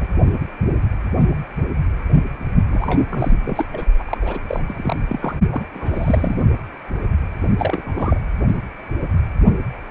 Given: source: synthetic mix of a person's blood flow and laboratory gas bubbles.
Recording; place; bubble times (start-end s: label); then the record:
Doppler ultrasound of blood flow; precordium
0.00-0.07 s: bubbles
2.70-3.04 s: bubbles
3.10-3.33 s: bubbles
3.45-3.66 s: bubbles
3.72-3.85 s: bubbles
3.99-4.17 s: bubbles
4.21-4.39 s: bubbles
4.47-4.63 s: bubbles
4.66-4.96 s: bubbles
5.08-5.35 s: bubbles
5.50-5.64 s: bubbles
5.74-6.41 s: bubbles
7.58-8.20 s: bubbles
From the record:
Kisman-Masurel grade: 332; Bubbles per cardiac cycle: rolling drumbeat, 9 or more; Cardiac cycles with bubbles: 50 to 99%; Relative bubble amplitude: moderate (0.250 to 0.450); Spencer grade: 3 (all of the cardiac periods contain showers or single bubble signals, but not dominating or overriding the cardiac motion signals); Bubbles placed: only in the low amplitude regions of the cardiac cycle